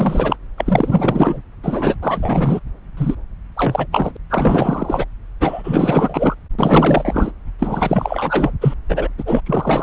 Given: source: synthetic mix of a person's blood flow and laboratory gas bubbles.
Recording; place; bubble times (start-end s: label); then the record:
Doppler ultrasound of blood flow; subclavian vein
0.00-0.36 s: bubbles
0.57-1.42 s: bubbles
1.62-1.96 s: bubbles
2.02-2.60 s: bubbles
2.96-3.15 s: bubbles
3.56-3.87 s: bubbles
3.92-4.12 s: bubbles
4.14-4.17 s: bubbles
4.29-5.05 s: bubbles
5.40-6.34 s: bubbles
6.58-7.32 s: bubbles
7.58-8.52 s: bubbles
8.61-8.74 s: bubbles
8.88-9.08 s: bubbles
9.18-9.41 s: bubbles
9.46-9.83 s: bubbles
From the record:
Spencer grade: 4 (maximum detectable bubble signal sounding continuously throughout systole and diastole of every cardiac period, and overriding the amplitude of the normal cardiac signals); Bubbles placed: anywhere in the cardiac cycle